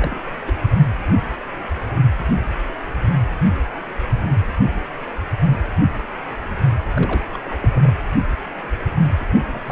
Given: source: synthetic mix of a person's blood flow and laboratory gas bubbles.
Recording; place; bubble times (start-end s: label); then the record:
Doppler ultrasound of blood flow; precordium
0.00-0.20 s: bubbles
0.46-0.54 s: bubbles
6.95-7.26 s: bubbles
7.33-7.38 s: bubbles
7.45-7.59 s: bubbles
7.62-7.69 s: bubbles
7.72-7.94 s: bubbles
9.21-9.25 s: bubbles
9.52-9.72 s: bubbles
From the record:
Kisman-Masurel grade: 221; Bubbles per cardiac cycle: several, 3 to 8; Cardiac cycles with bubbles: 10 to 50%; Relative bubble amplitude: barely perceptible (0.100 to 0.250); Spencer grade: 2 (many but less than half of the cardiac periods contain bubble signals, singularly or in groups); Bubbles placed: anywhere in the cardiac cycle